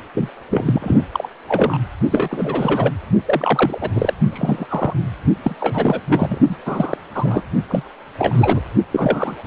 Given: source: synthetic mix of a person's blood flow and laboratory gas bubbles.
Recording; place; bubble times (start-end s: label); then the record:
Doppler ultrasound of blood flow; precordium
0.14-0.29 s: bubbles
0.50-1.05 s: bubbles
1.13-1.28 s: bubbles
1.48-1.78 s: bubbles
2.11-2.92 s: bubbles
3.25-3.78 s: bubbles
3.80-3.91 s: bubbles
3.95-4.13 s: bubbles
4.32-4.67 s: bubbles
4.69-4.93 s: bubbles
5.43-5.55 s: bubbles
5.60-6.01 s: bubbles
6.08-6.39 s: bubbles
6.49-6.55 s: bubbles
6.66-6.97 s: bubbles
7.14-7.42 s: bubbles
7.68-7.83 s: bubbles
8.18-8.61 s: bubbles
8.92-9.34 s: bubbles
9.44-9.46 s: bubbles
From the record:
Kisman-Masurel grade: 342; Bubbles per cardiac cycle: rolling drumbeat, 9 or more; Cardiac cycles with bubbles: 100%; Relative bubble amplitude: moderate (0.250 to 0.450); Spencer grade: 3 (all of the cardiac periods contain showers or single bubble signals, but not dominating or overriding the cardiac motion signals); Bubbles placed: only in the low amplitude regions of the cardiac cycle